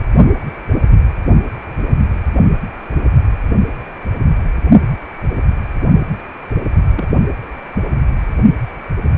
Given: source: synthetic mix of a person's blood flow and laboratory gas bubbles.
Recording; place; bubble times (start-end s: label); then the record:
Doppler ultrasound of blood flow; precordium
6.95-7.08 s: bubbles
From the record:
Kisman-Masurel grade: 121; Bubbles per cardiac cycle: 1 to 2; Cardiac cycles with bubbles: 10 to 50%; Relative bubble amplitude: barely perceptible (0.100 to 0.250); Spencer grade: 2 (many but less than half of the cardiac periods contain bubble signals, singularly or in groups); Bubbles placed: only in the low amplitude regions of the cardiac cycle